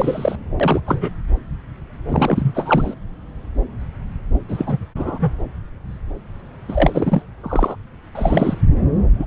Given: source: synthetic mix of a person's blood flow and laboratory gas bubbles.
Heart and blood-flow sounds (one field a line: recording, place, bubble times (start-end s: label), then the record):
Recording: Doppler ultrasound of blood flow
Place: subclavian vein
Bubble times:
0.00-0.35 s: bubbles
0.59-0.80 s: bubbles
0.86-1.11 s: bubbles
2.09-2.94 s: bubbles
4.48-4.78 s: bubbles
4.96-5.33 s: bubbles
6.69-7.22 s: bubbles
7.43-7.76 s: bubbles
8.15-8.62 s: bubbles
9.12-9.27 s: bubbles
From the record:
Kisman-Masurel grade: 232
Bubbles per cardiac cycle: several, 3 to 8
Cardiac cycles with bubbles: 50 to 99%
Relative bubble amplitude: moderate (0.250 to 0.450)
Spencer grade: 3 (all of the cardiac periods contain showers or single bubble signals, but not dominating or overriding the cardiac motion signals)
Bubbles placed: anywhere in the cardiac cycle